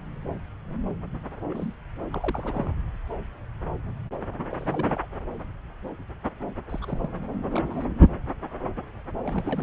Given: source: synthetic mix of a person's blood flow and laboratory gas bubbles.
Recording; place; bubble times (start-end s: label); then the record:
Doppler ultrasound of blood flow; subclavian vein
1.49-1.73 s: bubbles
2.12-2.72 s: bubbles
4.51-5.06 s: bubbles
6.69-7.09 s: bubbles
7.53-7.62 s: bubbles
7.70-7.86 s: bubbles
8.01-8.04 s: bubbles
9.23-9.63 s: bubbles
From the record:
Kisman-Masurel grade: 221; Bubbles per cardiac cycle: several, 3 to 8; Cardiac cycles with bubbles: 10 to 50%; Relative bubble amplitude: barely perceptible (0.100 to 0.250); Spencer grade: 2 (many but less than half of the cardiac periods contain bubble signals, singularly or in groups); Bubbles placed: anywhere in the cardiac cycle